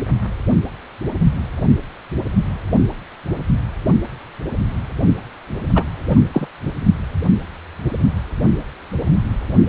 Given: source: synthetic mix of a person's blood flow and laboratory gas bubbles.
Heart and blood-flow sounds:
Doppler ultrasound of blood flow; precordium
5.75-5.84 s: bubbles
6.08-6.19 s: bubbles
6.33-6.47 s: bubbles
From the record:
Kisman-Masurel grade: 123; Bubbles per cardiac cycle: 1 to 2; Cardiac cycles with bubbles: 10 to 50%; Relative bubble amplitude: loud (0.450 to 0.775); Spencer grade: 2 (many but less than half of the cardiac periods contain bubble signals, singularly or in groups); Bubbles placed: anywhere in the cardiac cycle

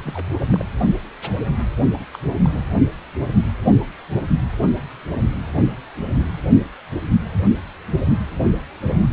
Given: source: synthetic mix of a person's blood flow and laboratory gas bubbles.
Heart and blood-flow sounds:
Doppler ultrasound of blood flow; precordium
0.00-0.29 s: bubbles
0.39-0.64 s: bubbles
1.95-2.04 s: bubbles
2.14-2.18 s: bubbles
2.44-2.62 s: bubbles
From the record:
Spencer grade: 2 (many but less than half of the cardiac periods contain bubble signals, singularly or in groups); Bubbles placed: only in the low amplitude regions of the cardiac cycle

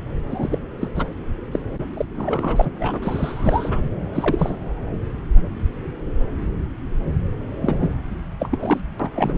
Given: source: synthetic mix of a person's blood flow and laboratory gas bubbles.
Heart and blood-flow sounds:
Doppler ultrasound of blood flow; subclavian vein
0.29-0.58 s: bubbles
0.81-0.89 s: bubbles
0.95-1.06 s: bubbles
1.53-1.59 s: bubbles
1.95-2.06 s: bubbles
2.15-2.70 s: bubbles
2.79-3.00 s: bubbles
3.02-3.82 s: bubbles
4.13-4.55 s: bubbles
7.62-7.97 s: bubbles
8.39-8.80 s: bubbles
8.99-9.09 s: bubbles
9.15-9.38 s: bubbles
From the record:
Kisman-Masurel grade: 232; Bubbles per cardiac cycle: several, 3 to 8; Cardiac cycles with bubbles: 50 to 99%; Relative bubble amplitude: moderate (0.250 to 0.450); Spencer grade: 3 (all of the cardiac periods contain showers or single bubble signals, but not dominating or overriding the cardiac motion signals); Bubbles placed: anywhere in the cardiac cycle

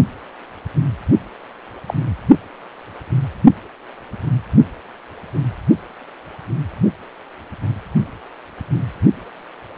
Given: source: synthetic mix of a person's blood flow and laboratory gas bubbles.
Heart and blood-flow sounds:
Doppler ultrasound of blood flow; precordium
1.89-1.94 s: bubbles
From the record:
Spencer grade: 1 (occasional bubble signal discernible with the cardiac motion signal, with majority of cardiac periods free of bubbles); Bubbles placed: only in the low amplitude regions of the cardiac cycle

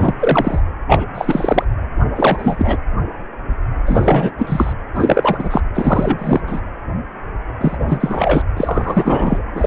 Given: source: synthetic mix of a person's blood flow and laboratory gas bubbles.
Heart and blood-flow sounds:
Doppler ultrasound of blood flow; precordium
0.00-0.15 s: bubbles
0.20-0.60 s: bubbles
0.88-1.05 s: bubbles
1.14-1.64 s: bubbles
2.15-2.77 s: bubbles
3.86-4.31 s: bubbles
4.38-4.73 s: bubbles
4.94-5.61 s: bubbles
5.75-6.40 s: bubbles
6.47-6.62 s: bubbles
7.60-8.42 s: bubbles
8.57-9.43 s: bubbles
9.54-9.67 s: bubbles
From the record:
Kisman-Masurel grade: 333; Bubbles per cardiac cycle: rolling drumbeat, 9 or more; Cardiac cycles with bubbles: 50 to 99%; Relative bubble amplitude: loud (0.450 to 0.775); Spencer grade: 3 (all of the cardiac periods contain showers or single bubble signals, but not dominating or overriding the cardiac motion signals); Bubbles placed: anywhere in the cardiac cycle

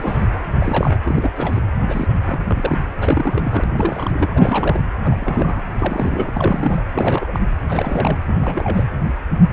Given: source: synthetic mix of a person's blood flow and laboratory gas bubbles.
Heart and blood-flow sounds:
Doppler ultrasound of blood flow; precordium
0.00-0.28 s: bubbles
0.60-0.99 s: bubbles
1.04-1.31 s: bubbles
1.35-1.62 s: bubbles
1.88-2.08 s: bubbles
2.25-2.40 s: bubbles
2.45-2.79 s: bubbles
2.97-3.64 s: bubbles
3.72-4.80 s: bubbles
5.01-5.64 s: bubbles
5.79-6.31 s: bubbles
6.33-6.84 s: bubbles
6.93-7.39 s: bubbles
7.69-8.18 s: bubbles
8.26-8.87 s: bubbles
From the record:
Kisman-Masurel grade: 332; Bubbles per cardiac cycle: rolling drumbeat, 9 or more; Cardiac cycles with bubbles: 50 to 99%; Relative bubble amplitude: moderate (0.250 to 0.450); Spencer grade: 3 (all of the cardiac periods contain showers or single bubble signals, but not dominating or overriding the cardiac motion signals); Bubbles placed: anywhere in the cardiac cycle

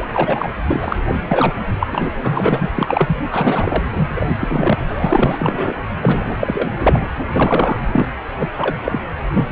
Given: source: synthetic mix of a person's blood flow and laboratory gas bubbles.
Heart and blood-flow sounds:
Doppler ultrasound of blood flow; precordium
0.00-0.06 s: bubbles
0.13-0.48 s: bubbles
0.68-0.99 s: bubbles
1.08-1.16 s: bubbles
1.28-1.55 s: bubbles
1.80-1.87 s: bubbles
1.92-2.10 s: bubbles
2.23-2.69 s: bubbles
2.74-3.17 s: bubbles
3.30-3.83 s: bubbles
3.93-4.34 s: bubbles
4.39-4.77 s: bubbles
4.88-5.78 s: bubbles
6.02-6.35 s: bubbles
6.39-6.71 s: bubbles
6.83-7.11 s: bubbles
7.33-7.81 s: bubbles
7.91-8.11 s: bubbles
8.39-8.49 s: bubbles
8.57-8.77 s: bubbles
8.84-9.00 s: bubbles
9.33-9.52 s: bubbles
From the record:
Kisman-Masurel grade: 243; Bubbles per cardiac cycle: several, 3 to 8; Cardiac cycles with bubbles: 100%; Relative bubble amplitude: loud (0.450 to 0.775); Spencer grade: 3 (all of the cardiac periods contain showers or single bubble signals, but not dominating or overriding the cardiac motion signals); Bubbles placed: anywhere in the cardiac cycle

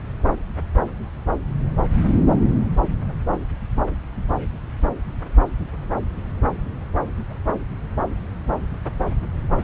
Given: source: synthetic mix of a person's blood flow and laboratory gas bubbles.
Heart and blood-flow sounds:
Doppler ultrasound of blood flow; subclavian vein
no bubbles
From the record:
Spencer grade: 0 (complete lack of bubble signals)

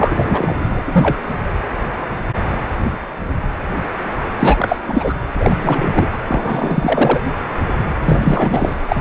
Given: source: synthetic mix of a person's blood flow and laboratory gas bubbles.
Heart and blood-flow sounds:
Doppler ultrasound of blood flow; precordium
0.00-0.56 s: bubbles
0.70-1.17 s: bubbles
4.39-4.76 s: bubbles
4.88-5.14 s: bubbles
5.39-5.56 s: bubbles
5.59-6.08 s: bubbles
6.28-7.20 s: bubbles
8.06-8.76 s: bubbles
8.88-9.01 s: bubbles
From the record:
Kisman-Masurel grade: 333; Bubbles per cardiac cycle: rolling drumbeat, 9 or more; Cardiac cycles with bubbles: 50 to 99%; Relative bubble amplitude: loud (0.450 to 0.775); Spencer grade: 3 (all of the cardiac periods contain showers or single bubble signals, but not dominating or overriding the cardiac motion signals); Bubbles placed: anywhere in the cardiac cycle

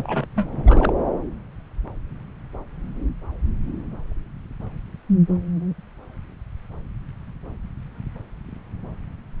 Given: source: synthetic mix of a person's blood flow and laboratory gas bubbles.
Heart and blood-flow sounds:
Doppler ultrasound of blood flow; subclavian vein
0.00-0.26 s: bubbles
0.36-0.92 s: bubbles
From the record:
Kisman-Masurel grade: 222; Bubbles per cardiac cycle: several, 3 to 8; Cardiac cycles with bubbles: 10 to 50%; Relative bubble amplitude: moderate (0.250 to 0.450); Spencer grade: 2 (many but less than half of the cardiac periods contain bubble signals, singularly or in groups); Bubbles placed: anywhere in the cardiac cycle

